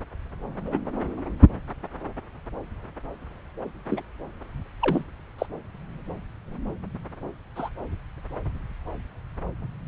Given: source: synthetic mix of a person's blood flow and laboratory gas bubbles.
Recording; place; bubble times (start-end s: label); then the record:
Doppler ultrasound of blood flow; subclavian vein
0.65-0.78 s: bubbles
3.90-4.04 s: bubbles
4.79-5.04 s: bubbles
5.38-5.46 s: bubbles
7.55-7.69 s: bubbles
From the record:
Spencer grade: 2 (many but less than half of the cardiac periods contain bubble signals, singularly or in groups); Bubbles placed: anywhere in the cardiac cycle